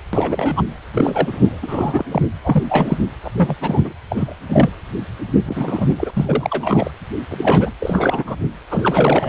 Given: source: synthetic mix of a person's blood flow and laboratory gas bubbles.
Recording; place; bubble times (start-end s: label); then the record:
Doppler ultrasound of blood flow; precordium
0.13-0.62 s: bubbles
0.93-1.59 s: bubbles
1.62-2.04 s: bubbles
2.11-2.22 s: bubbles
2.44-2.63 s: bubbles
2.69-2.98 s: bubbles
3.24-3.30 s: bubbles
3.37-3.55 s: bubbles
3.61-3.93 s: bubbles
4.10-4.35 s: bubbles
4.49-4.70 s: bubbles
5.46-6.11 s: bubbles
6.15-6.91 s: bubbles
7.29-7.72 s: bubbles
7.80-8.36 s: bubbles
8.70-9.29 s: bubbles
From the record:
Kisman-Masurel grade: 342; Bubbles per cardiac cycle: rolling drumbeat, 9 or more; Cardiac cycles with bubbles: 100%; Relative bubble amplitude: moderate (0.250 to 0.450); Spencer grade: 3 (all of the cardiac periods contain showers or single bubble signals, but not dominating or overriding the cardiac motion signals); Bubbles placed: anywhere in the cardiac cycle